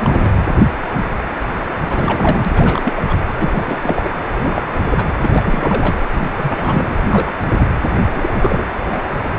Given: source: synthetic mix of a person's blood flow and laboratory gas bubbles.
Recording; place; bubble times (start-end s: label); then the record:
Doppler ultrasound of blood flow; precordium
0.00-0.30 s: bubbles
1.86-2.51 s: bubbles
2.54-3.03 s: bubbles
3.07-3.18 s: bubbles
3.40-3.78 s: bubbles
3.82-4.11 s: bubbles
4.26-4.69 s: bubbles
4.74-5.07 s: bubbles
5.23-6.08 s: bubbles
6.12-6.29 s: bubbles
6.37-6.97 s: bubbles
7.11-7.33 s: bubbles
7.46-7.67 s: bubbles
8.08-8.64 s: bubbles
8.91-9.02 s: bubbles
From the record:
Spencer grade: 3 (all of the cardiac periods contain showers or single bubble signals, but not dominating or overriding the cardiac motion signals); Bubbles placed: anywhere in the cardiac cycle